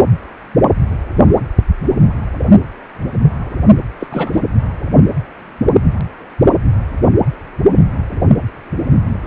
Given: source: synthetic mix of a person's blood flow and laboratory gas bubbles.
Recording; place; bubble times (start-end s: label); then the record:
Doppler ultrasound of blood flow; precordium
3.99-4.07 s: bubbles
4.12-4.41 s: bubbles
From the record:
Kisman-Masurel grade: 222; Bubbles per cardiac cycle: several, 3 to 8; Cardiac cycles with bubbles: 10 to 50%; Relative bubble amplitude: moderate (0.250 to 0.450); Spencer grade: 2 (many but less than half of the cardiac periods contain bubble signals, singularly or in groups); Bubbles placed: anywhere in the cardiac cycle